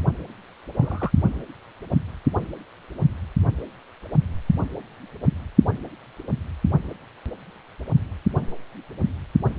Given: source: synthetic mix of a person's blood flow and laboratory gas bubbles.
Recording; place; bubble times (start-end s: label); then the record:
Doppler ultrasound of blood flow; precordium
0.77-1.10 s: bubbles
From the record:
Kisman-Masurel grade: 111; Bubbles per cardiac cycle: 1 to 2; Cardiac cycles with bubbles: 1 to 10%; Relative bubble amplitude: barely perceptible (0.100 to 0.250); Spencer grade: 1 (occasional bubble signal discernible with the cardiac motion signal, with majority of cardiac periods free of bubbles); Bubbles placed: only in the low amplitude regions of the cardiac cycle